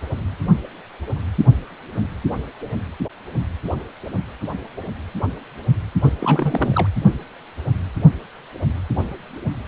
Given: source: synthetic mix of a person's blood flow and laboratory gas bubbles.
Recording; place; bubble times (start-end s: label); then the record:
Doppler ultrasound of blood flow; precordium
6.02-6.12 s: bubbles
6.18-6.88 s: bubbles
From the record:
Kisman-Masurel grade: 212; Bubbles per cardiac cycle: several, 3 to 8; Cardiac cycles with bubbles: 1 to 10%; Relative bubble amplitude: moderate (0.250 to 0.450); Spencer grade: 1 (occasional bubble signal discernible with the cardiac motion signal, with majority of cardiac periods free of bubbles); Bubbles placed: anywhere in the cardiac cycle